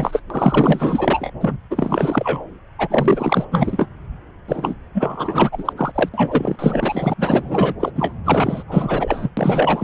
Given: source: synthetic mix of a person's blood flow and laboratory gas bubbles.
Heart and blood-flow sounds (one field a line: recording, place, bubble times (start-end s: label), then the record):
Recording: Doppler ultrasound of blood flow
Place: subclavian vein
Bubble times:
0.00-0.22 s: bubbles
0.30-1.31 s: bubbles
1.40-1.57 s: bubbles
1.70-2.44 s: bubbles
2.79-3.45 s: bubbles
3.51-3.87 s: bubbles
4.48-4.75 s: bubbles
4.94-5.73 s: bubbles
5.76-5.92 s: bubbles
5.95-6.09 s: bubbles
6.13-6.56 s: bubbles
6.58-7.13 s: bubbles
7.17-7.74 s: bubbles
7.79-7.91 s: bubbles
7.95-8.13 s: bubbles
8.25-8.63 s: bubbles
8.68-9.30 s: bubbles
9.37-9.84 s: bubbles
From the record:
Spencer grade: 4 (maximum detectable bubble signal sounding continuously throughout systole and diastole of every cardiac period, and overriding the amplitude of the normal cardiac signals)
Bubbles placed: anywhere in the cardiac cycle